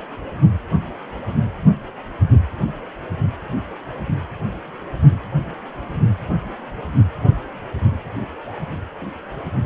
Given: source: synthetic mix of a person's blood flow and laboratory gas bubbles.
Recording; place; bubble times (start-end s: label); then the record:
Doppler ultrasound of blood flow; precordium
no bubbles
From the record:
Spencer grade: 0 (complete lack of bubble signals)